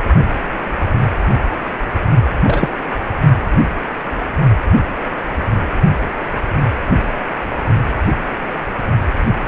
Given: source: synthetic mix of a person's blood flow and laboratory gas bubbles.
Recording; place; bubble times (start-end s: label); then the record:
Doppler ultrasound of blood flow; precordium
2.42-2.74 s: bubbles
From the record:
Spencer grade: 2 (many but less than half of the cardiac periods contain bubble signals, singularly or in groups); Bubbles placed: only in the low amplitude regions of the cardiac cycle